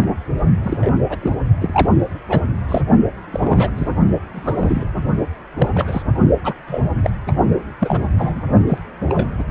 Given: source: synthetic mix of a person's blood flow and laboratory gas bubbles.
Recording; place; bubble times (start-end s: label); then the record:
Doppler ultrasound of blood flow; precordium
0.00-0.20 s: bubbles
0.62-0.91 s: bubbles
1.09-1.18 s: bubbles
1.22-1.35 s: bubbles
1.61-1.90 s: bubbles
2.29-2.41 s: bubbles
2.69-2.81 s: bubbles
3.31-3.70 s: bubbles
3.76-3.89 s: bubbles
4.32-4.84 s: bubbles
5.57-5.71 s: bubbles
5.73-6.02 s: bubbles
6.44-6.54 s: bubbles
6.67-6.81 s: bubbles
7.03-7.10 s: bubbles
7.27-7.31 s: bubbles
7.79-8.01 s: bubbles
8.19-8.41 s: bubbles
8.67-8.78 s: bubbles
9.06-9.29 s: bubbles
9.38-9.45 s: bubbles
From the record:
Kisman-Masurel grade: 242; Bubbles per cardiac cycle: several, 3 to 8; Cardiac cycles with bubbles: 100%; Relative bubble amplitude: moderate (0.250 to 0.450); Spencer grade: 3 (all of the cardiac periods contain showers or single bubble signals, but not dominating or overriding the cardiac motion signals); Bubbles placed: only in the low amplitude regions of the cardiac cycle